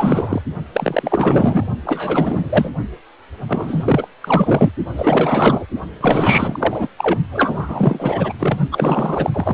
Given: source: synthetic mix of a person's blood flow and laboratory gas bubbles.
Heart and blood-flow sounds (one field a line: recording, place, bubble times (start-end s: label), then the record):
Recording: Doppler ultrasound of blood flow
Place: precordium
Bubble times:
0.00-0.42 s: bubbles
0.73-1.65 s: bubbles
1.85-2.71 s: bubbles
3.48-4.08 s: bubbles
4.22-4.72 s: bubbles
4.96-5.66 s: bubbles
6.01-6.88 s: bubbles
6.97-7.19 s: bubbles
7.31-8.33 s: bubbles
8.38-8.58 s: bubbles
8.71-9.30 s: bubbles
9.33-9.54 s: bubbles
From the record:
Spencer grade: 4 (maximum detectable bubble signal sounding continuously throughout systole and diastole of every cardiac period, and overriding the amplitude of the normal cardiac signals)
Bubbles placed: only in the low amplitude regions of the cardiac cycle